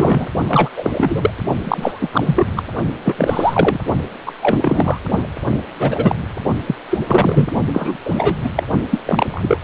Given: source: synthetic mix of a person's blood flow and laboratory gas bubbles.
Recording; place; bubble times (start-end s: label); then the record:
Doppler ultrasound of blood flow; precordium
0.00-0.27 s: bubbles
0.47-0.69 s: bubbles
0.76-1.30 s: bubbles
1.64-2.09 s: bubbles
2.12-2.47 s: bubbles
2.56-2.62 s: bubbles
2.93-3.79 s: bubbles
4.26-4.33 s: bubbles
4.40-4.99 s: bubbles
5.79-6.16 s: bubbles
6.67-6.75 s: bubbles
6.90-6.99 s: bubbles
7.07-7.49 s: bubbles
7.73-7.97 s: bubbles
8.05-8.36 s: bubbles
8.44-8.49 s: bubbles
8.56-8.63 s: bubbles
8.91-8.99 s: bubbles
9.06-9.60 s: bubbles
From the record:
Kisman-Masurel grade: 243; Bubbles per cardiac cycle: several, 3 to 8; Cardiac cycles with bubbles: 100%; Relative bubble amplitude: loud (0.450 to 0.775); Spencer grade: 3 (all of the cardiac periods contain showers or single bubble signals, but not dominating or overriding the cardiac motion signals); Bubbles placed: only in the low amplitude regions of the cardiac cycle